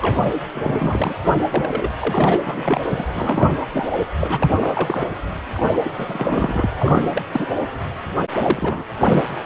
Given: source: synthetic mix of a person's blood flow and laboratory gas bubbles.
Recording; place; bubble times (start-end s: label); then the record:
Doppler ultrasound of blood flow; precordium
0.01-0.27 s: bubbles
0.54-1.14 s: bubbles
1.54-1.89 s: bubbles
2.00-2.42 s: bubbles
2.46-3.06 s: bubbles
3.14-3.54 s: bubbles
3.73-3.98 s: bubbles
4.20-4.57 s: bubbles
4.59-5.07 s: bubbles
5.54-5.79 s: bubbles
5.84-5.92 s: bubbles
5.97-6.70 s: bubbles
6.79-7.23 s: bubbles
7.33-7.46 s: bubbles
8.37-8.86 s: bubbles
9.05-9.23 s: bubbles
From the record:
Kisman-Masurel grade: 342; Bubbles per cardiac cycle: rolling drumbeat, 9 or more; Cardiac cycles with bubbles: 100%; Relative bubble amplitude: moderate (0.250 to 0.450); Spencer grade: 3 (all of the cardiac periods contain showers or single bubble signals, but not dominating or overriding the cardiac motion signals); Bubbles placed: anywhere in the cardiac cycle